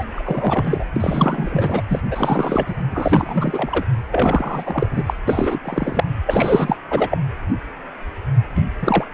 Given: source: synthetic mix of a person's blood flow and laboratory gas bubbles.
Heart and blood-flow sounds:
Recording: Doppler ultrasound of blood flow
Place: precordium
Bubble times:
0.00-0.05 s: bubbles
0.16-0.84 s: bubbles
0.96-1.82 s: bubbles
1.89-2.02 s: bubbles
2.11-2.75 s: bubbles
2.90-3.84 s: bubbles
4.11-4.87 s: bubbles
4.90-5.03 s: bubbles
5.06-5.14 s: bubbles
5.27-5.59 s: bubbles
5.64-6.04 s: bubbles
6.26-6.77 s: bubbles
6.90-7.07 s: bubbles
7.11-7.18 s: bubbles
8.55-8.65 s: bubbles
8.82-9.04 s: bubbles
From the record:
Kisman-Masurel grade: 333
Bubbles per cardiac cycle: rolling drumbeat, 9 or more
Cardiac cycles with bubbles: 50 to 99%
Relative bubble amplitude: loud (0.450 to 0.775)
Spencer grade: 3 (all of the cardiac periods contain showers or single bubble signals, but not dominating or overriding the cardiac motion signals)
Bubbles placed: anywhere in the cardiac cycle

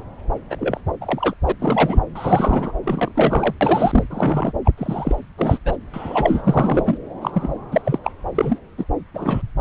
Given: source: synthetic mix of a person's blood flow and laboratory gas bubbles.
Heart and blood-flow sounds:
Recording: Doppler ultrasound of blood flow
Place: subclavian vein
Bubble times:
0.50-0.56 s: bubbles
0.58-0.80 s: bubbles
1.01-1.33 s: bubbles
1.46-1.52 s: bubbles
1.59-2.00 s: bubbles
2.15-2.73 s: bubbles
2.83-3.12 s: bubbles
3.15-3.54 s: bubbles
3.61-4.04 s: bubbles
4.10-4.52 s: bubbles
4.64-4.71 s: bubbles
4.78-5.15 s: bubbles
5.38-5.58 s: bubbles
5.65-5.77 s: bubbles
5.93-6.98 s: bubbles
7.21-7.54 s: bubbles
7.71-7.81 s: bubbles
7.85-7.98 s: bubbles
8.04-8.12 s: bubbles
8.35-8.58 s: bubbles
8.78-8.85 s: bubbles
9.14-9.41 s: bubbles
From the record:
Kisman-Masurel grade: 243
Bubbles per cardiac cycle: several, 3 to 8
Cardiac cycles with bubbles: 100%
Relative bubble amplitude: loud (0.450 to 0.775)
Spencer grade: 3 (all of the cardiac periods contain showers or single bubble signals, but not dominating or overriding the cardiac motion signals)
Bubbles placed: anywhere in the cardiac cycle

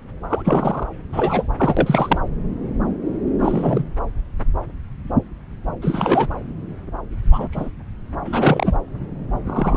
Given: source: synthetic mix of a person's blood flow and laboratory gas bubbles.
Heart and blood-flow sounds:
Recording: Doppler ultrasound of blood flow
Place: subclavian vein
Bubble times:
0.29-0.42 s: bubbles
0.45-0.87 s: bubbles
1.12-1.46 s: bubbles
1.57-2.19 s: bubbles
3.38-3.84 s: bubbles
5.82-6.27 s: bubbles
7.31-7.48 s: bubbles
7.52-7.69 s: bubbles
8.25-8.78 s: bubbles
9.44-9.77 s: bubbles
From the record:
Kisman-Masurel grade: 233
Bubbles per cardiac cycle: several, 3 to 8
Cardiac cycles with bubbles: 50 to 99%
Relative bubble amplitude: loud (0.450 to 0.775)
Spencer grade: 3 (all of the cardiac periods contain showers or single bubble signals, but not dominating or overriding the cardiac motion signals)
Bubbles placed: anywhere in the cardiac cycle

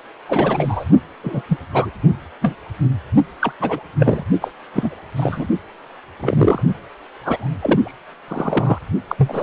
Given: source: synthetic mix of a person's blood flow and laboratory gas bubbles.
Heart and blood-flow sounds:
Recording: Doppler ultrasound of blood flow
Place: precordium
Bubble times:
0.28-0.84 s: bubbles
1.23-1.42 s: bubbles
1.47-1.57 s: bubbles
1.70-1.91 s: bubbles
2.42-2.55 s: bubbles
3.40-3.52 s: bubbles
3.60-3.80 s: bubbles
3.99-4.23 s: bubbles
4.41-4.51 s: bubbles
4.74-4.95 s: bubbles
5.16-5.48 s: bubbles
6.20-6.62 s: bubbles
7.23-7.48 s: bubbles
7.58-7.98 s: bubbles
8.28-8.79 s: bubbles
9.07-9.43 s: bubbles
From the record:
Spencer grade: 3 (all of the cardiac periods contain showers or single bubble signals, but not dominating or overriding the cardiac motion signals)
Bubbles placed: only in the low amplitude regions of the cardiac cycle

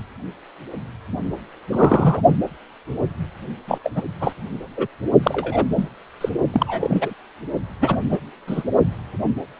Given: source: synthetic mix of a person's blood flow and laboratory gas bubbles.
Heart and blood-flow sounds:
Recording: Doppler ultrasound of blood flow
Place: precordium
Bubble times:
1.71-2.22 s: bubbles
3.68-3.78 s: bubbles
3.83-3.92 s: bubbles
3.95-4.02 s: bubbles
4.20-4.32 s: bubbles
4.77-4.87 s: bubbles
5.22-5.65 s: bubbles
5.75-5.89 s: bubbles
6.21-6.29 s: bubbles
6.52-7.13 s: bubbles
7.79-7.96 s: bubbles
8.09-8.18 s: bubbles
8.47-8.63 s: bubbles
From the record:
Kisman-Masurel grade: 233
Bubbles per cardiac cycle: several, 3 to 8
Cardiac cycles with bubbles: 50 to 99%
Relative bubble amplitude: loud (0.450 to 0.775)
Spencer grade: 3 (all of the cardiac periods contain showers or single bubble signals, but not dominating or overriding the cardiac motion signals)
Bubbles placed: only in the low amplitude regions of the cardiac cycle

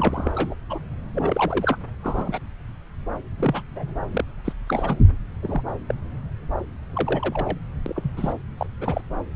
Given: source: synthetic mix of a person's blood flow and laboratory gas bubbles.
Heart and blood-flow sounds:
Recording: Doppler ultrasound of blood flow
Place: subclavian vein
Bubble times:
0.00-0.31 s: bubbles
0.35-0.55 s: bubbles
0.69-0.79 s: bubbles
1.15-1.77 s: bubbles
2.03-2.40 s: bubbles
3.39-3.62 s: bubbles
3.71-3.94 s: bubbles
4.10-4.24 s: bubbles
4.44-4.53 s: bubbles
4.67-4.97 s: bubbles
5.42-5.62 s: bubbles
5.88-5.94 s: bubbles
6.93-7.58 s: bubbles
7.86-7.94 s: bubbles
7.96-8.12 s: bubbles
8.17-8.33 s: bubbles
8.57-8.66 s: bubbles
8.80-9.01 s: bubbles
From the record:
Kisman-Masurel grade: 242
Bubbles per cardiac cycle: several, 3 to 8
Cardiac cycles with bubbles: 100%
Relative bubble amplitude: moderate (0.250 to 0.450)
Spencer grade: 3 (all of the cardiac periods contain showers or single bubble signals, but not dominating or overriding the cardiac motion signals)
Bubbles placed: anywhere in the cardiac cycle

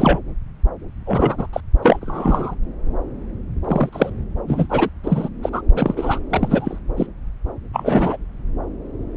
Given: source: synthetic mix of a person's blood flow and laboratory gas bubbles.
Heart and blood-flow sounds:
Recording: Doppler ultrasound of blood flow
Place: subclavian vein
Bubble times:
0.00-0.20 s: bubbles
1.06-1.47 s: bubbles
1.53-1.61 s: bubbles
1.82-2.55 s: bubbles
3.64-3.89 s: bubbles
3.92-4.10 s: bubbles
4.47-4.89 s: bubbles
5.04-5.29 s: bubbles
5.42-5.50 s: bubbles
5.52-5.62 s: bubbles
5.75-6.20 s: bubbles
6.30-6.79 s: bubbles
6.96-7.06 s: bubbles
7.72-8.17 s: bubbles
From the record:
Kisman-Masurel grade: 233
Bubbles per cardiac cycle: several, 3 to 8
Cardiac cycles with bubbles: 50 to 99%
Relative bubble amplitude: loud (0.450 to 0.775)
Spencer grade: 3 (all of the cardiac periods contain showers or single bubble signals, but not dominating or overriding the cardiac motion signals)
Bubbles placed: anywhere in the cardiac cycle

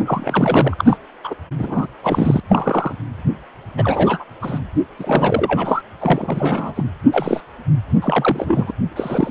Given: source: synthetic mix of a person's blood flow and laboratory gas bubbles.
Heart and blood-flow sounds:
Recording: Doppler ultrasound of blood flow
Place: precordium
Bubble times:
0.06-0.74 s: bubbles
0.77-0.97 s: bubbles
1.24-1.34 s: bubbles
1.59-1.87 s: bubbles
2.03-2.40 s: bubbles
2.49-2.96 s: bubbles
3.77-4.25 s: bubbles
4.42-4.59 s: bubbles
4.99-5.83 s: bubbles
6.00-6.84 s: bubbles
7.12-7.40 s: bubbles
8.02-8.71 s: bubbles
8.96-9.31 s: bubbles
From the record:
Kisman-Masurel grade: 242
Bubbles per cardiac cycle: several, 3 to 8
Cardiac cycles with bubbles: 100%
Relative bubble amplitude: moderate (0.250 to 0.450)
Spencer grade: 3 (all of the cardiac periods contain showers or single bubble signals, but not dominating or overriding the cardiac motion signals)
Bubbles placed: anywhere in the cardiac cycle

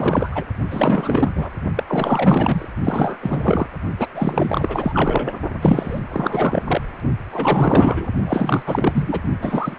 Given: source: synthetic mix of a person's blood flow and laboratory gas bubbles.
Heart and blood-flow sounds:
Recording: Doppler ultrasound of blood flow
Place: precordium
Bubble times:
0.00-0.45 s: bubbles
0.70-1.50 s: bubbles
1.75-1.83 s: bubbles
1.87-2.68 s: bubbles
2.83-3.18 s: bubbles
3.22-3.67 s: bubbles
3.99-4.07 s: bubbles
4.15-5.38 s: bubbles
5.61-6.00 s: bubbles
6.11-6.63 s: bubbles
6.67-6.82 s: bubbles
7.32-8.07 s: bubbles
8.25-8.63 s: bubbles
8.66-9.22 s: bubbles
9.41-9.75 s: bubbles
From the record:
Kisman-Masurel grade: 444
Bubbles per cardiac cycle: continuous sound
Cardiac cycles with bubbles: 100%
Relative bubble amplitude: maximal (0.775 to 0.999)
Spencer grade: 4 (maximum detectable bubble signal sounding continuously throughout systole and diastole of every cardiac period, and overriding the amplitude of the normal cardiac signals)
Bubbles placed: only in the low amplitude regions of the cardiac cycle

